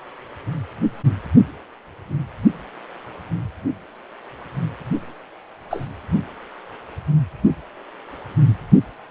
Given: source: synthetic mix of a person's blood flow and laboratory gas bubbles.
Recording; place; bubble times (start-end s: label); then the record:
Doppler ultrasound of blood flow; precordium
5.70-5.86 s: bubbles
From the record:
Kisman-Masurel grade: 122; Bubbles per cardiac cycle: 1 to 2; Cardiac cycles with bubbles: 10 to 50%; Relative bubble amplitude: moderate (0.250 to 0.450); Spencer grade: 2 (many but less than half of the cardiac periods contain bubble signals, singularly or in groups); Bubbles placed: anywhere in the cardiac cycle